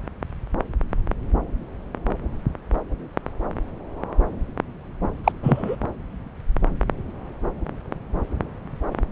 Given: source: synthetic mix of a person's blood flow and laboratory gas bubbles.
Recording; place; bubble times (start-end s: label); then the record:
Doppler ultrasound of blood flow; subclavian vein
5.24-5.32 s: bubbles
5.42-5.76 s: bubbles
From the record:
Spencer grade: 1 (occasional bubble signal discernible with the cardiac motion signal, with majority of cardiac periods free of bubbles); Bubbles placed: anywhere in the cardiac cycle